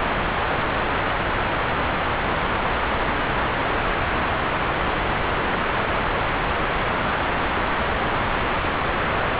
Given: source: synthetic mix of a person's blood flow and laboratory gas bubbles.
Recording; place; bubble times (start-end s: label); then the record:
Doppler ultrasound of blood flow; subclavian vein
no bubbles
From the record:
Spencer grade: 0 (complete lack of bubble signals)